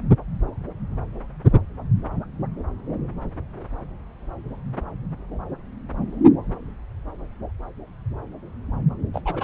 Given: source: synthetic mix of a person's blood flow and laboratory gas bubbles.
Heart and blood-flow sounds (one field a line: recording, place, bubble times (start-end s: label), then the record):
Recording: Doppler ultrasound of blood flow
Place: subclavian vein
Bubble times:
9.13-9.21 s: bubbles
9.25-9.44 s: bubbles
From the record:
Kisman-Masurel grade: 211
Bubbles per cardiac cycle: several, 3 to 8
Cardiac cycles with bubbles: 1 to 10%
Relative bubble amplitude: barely perceptible (0.100 to 0.250)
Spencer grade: 1 (occasional bubble signal discernible with the cardiac motion signal, with majority of cardiac periods free of bubbles)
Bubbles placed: anywhere in the cardiac cycle